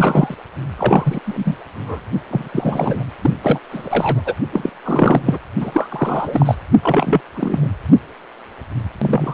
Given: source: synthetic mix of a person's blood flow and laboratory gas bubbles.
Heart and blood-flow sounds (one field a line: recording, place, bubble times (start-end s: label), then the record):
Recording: Doppler ultrasound of blood flow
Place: precordium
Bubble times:
0.00-0.35 s: bubbles
0.78-1.20 s: bubbles
1.26-1.56 s: bubbles
1.74-2.00 s: bubbles
2.30-2.48 s: bubbles
2.52-3.03 s: bubbles
3.21-3.30 s: bubbles
3.42-3.58 s: bubbles
3.71-4.21 s: bubbles
4.25-4.34 s: bubbles
4.52-4.70 s: bubbles
4.84-5.21 s: bubbles
5.25-5.40 s: bubbles
5.60-6.55 s: bubbles
6.82-7.21 s: bubbles
7.35-7.70 s: bubbles
8.99-9.34 s: bubbles
From the record:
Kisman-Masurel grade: 333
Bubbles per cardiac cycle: rolling drumbeat, 9 or more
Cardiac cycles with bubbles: 50 to 99%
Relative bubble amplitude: loud (0.450 to 0.775)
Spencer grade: 3 (all of the cardiac periods contain showers or single bubble signals, but not dominating or overriding the cardiac motion signals)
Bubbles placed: anywhere in the cardiac cycle